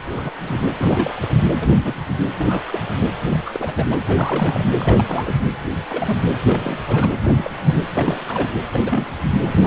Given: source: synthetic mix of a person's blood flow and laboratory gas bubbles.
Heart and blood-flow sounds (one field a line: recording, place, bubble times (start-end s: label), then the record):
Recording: Doppler ultrasound of blood flow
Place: precordium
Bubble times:
0.11-0.31 s: bubbles
0.41-0.66 s: bubbles
0.77-1.36 s: bubbles
1.44-1.50 s: bubbles
1.60-1.94 s: bubbles
2.37-2.63 s: bubbles
2.67-2.80 s: bubbles
2.89-3.08 s: bubbles
3.29-3.41 s: bubbles
3.45-3.97 s: bubbles
4.07-4.64 s: bubbles
4.76-5.35 s: bubbles
5.89-6.15 s: bubbles
6.45-6.77 s: bubbles
6.86-7.11 s: bubbles
7.24-7.50 s: bubbles
7.67-7.74 s: bubbles
7.94-8.54 s: bubbles
8.73-9.07 s: bubbles
9.53-9.66 s: bubbles
From the record:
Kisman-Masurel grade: 242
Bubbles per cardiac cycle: several, 3 to 8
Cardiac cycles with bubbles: 100%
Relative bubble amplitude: moderate (0.250 to 0.450)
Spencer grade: 3 (all of the cardiac periods contain showers or single bubble signals, but not dominating or overriding the cardiac motion signals)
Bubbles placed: anywhere in the cardiac cycle